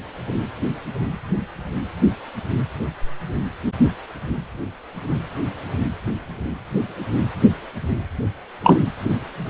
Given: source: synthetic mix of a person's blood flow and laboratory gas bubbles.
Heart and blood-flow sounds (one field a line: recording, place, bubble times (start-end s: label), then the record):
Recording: Doppler ultrasound of blood flow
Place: precordium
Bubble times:
8.63-8.80 s: bubbles
From the record:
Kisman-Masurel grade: 113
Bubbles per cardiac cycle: 1 to 2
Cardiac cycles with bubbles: 1 to 10%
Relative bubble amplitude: loud (0.450 to 0.775)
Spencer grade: 1 (occasional bubble signal discernible with the cardiac motion signal, with majority of cardiac periods free of bubbles)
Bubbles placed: anywhere in the cardiac cycle